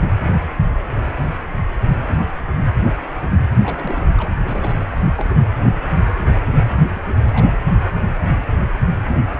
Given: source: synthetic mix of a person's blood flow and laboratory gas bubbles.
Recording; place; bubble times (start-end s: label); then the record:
Doppler ultrasound of blood flow; precordium
3.59-4.10 s: bubbles
4.18-4.29 s: bubbles
4.40-4.78 s: bubbles
4.90-4.97 s: bubbles
5.03-5.43 s: bubbles
6.56-6.79 s: bubbles
6.95-7.02 s: bubbles
7.04-7.13 s: bubbles
7.26-7.53 s: bubbles
From the record:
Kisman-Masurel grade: 221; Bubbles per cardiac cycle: several, 3 to 8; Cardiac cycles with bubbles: 10 to 50%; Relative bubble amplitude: barely perceptible (0.100 to 0.250); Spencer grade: 2 (many but less than half of the cardiac periods contain bubble signals, singularly or in groups); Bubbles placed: anywhere in the cardiac cycle